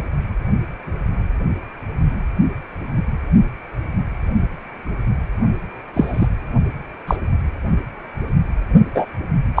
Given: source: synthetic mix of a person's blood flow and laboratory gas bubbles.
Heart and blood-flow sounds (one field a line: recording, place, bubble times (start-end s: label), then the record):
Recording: Doppler ultrasound of blood flow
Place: precordium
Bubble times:
5.93-6.27 s: bubbles
7.07-7.17 s: bubbles
8.94-9.06 s: bubbles
9.56-9.60 s: bubbles
From the record:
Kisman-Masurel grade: 123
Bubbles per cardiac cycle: 1 to 2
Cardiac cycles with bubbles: 10 to 50%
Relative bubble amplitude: loud (0.450 to 0.775)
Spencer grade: 2 (many but less than half of the cardiac periods contain bubble signals, singularly or in groups)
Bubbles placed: only in the low amplitude regions of the cardiac cycle